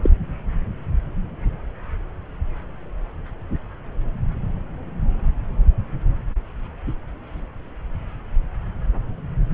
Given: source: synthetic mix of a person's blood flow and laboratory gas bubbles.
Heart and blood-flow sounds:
Doppler ultrasound of blood flow; subclavian vein
0.03-0.10 s: bubbles
From the record:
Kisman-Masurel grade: 112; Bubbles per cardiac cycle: 1 to 2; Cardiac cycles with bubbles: 1 to 10%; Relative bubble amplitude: moderate (0.250 to 0.450); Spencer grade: 1 (occasional bubble signal discernible with the cardiac motion signal, with majority of cardiac periods free of bubbles); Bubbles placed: anywhere in the cardiac cycle

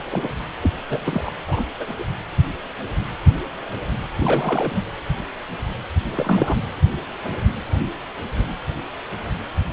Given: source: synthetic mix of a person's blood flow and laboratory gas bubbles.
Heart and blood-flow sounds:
Doppler ultrasound of blood flow; precordium
0.00-0.04 s: bubbles
0.10-0.28 s: bubbles
0.62-0.71 s: bubbles
0.90-1.31 s: bubbles
1.47-1.65 s: bubbles
1.80-1.95 s: bubbles
1.98-2.04 s: bubbles
4.17-4.83 s: bubbles
6.16-6.57 s: bubbles
From the record:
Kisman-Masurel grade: 222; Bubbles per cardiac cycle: several, 3 to 8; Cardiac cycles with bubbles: 10 to 50%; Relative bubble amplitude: moderate (0.250 to 0.450); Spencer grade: 2 (many but less than half of the cardiac periods contain bubble signals, singularly or in groups); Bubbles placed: anywhere in the cardiac cycle

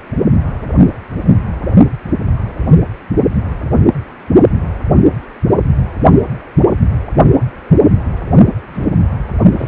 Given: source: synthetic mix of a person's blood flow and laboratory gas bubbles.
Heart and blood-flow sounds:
Doppler ultrasound of blood flow; precordium
8.74-8.86 s: bubbles
9.58-9.68 s: bubbles
From the record:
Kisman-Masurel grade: 112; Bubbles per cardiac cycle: 1 to 2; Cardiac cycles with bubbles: 1 to 10%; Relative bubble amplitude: moderate (0.250 to 0.450); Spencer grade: 1 (occasional bubble signal discernible with the cardiac motion signal, with majority of cardiac periods free of bubbles); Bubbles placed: only in the low amplitude regions of the cardiac cycle

